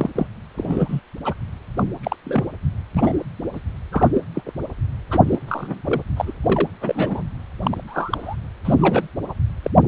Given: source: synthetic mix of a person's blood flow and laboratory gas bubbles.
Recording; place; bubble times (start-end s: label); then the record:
Doppler ultrasound of blood flow; precordium
0.00-0.10 s: bubbles
0.15-0.27 s: bubbles
0.57-1.00 s: bubbles
1.24-1.34 s: bubbles
1.76-1.83 s: bubbles
2.03-2.16 s: bubbles
2.25-2.44 s: bubbles
2.94-3.23 s: bubbles
3.52-3.60 s: bubbles
3.92-4.09 s: bubbles
4.14-4.22 s: bubbles
4.34-4.43 s: bubbles
4.47-4.52 s: bubbles
5.10-5.23 s: bubbles
5.29-5.39 s: bubbles
5.48-5.82 s: bubbles
5.84-6.02 s: bubbles
6.16-6.33 s: bubbles
6.44-6.68 s: bubbles
6.81-7.22 s: bubbles
7.62-7.83 s: bubbles
7.87-8.36 s: bubbles
8.64-9.07 s: bubbles
9.29-9.34 s: bubbles
9.62-9.71 s: bubbles
9.81-9.88 s: bubbles
From the record:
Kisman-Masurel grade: 242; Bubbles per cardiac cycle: several, 3 to 8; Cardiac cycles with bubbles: 100%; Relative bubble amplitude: moderate (0.250 to 0.450); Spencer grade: 3 (all of the cardiac periods contain showers or single bubble signals, but not dominating or overriding the cardiac motion signals); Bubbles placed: anywhere in the cardiac cycle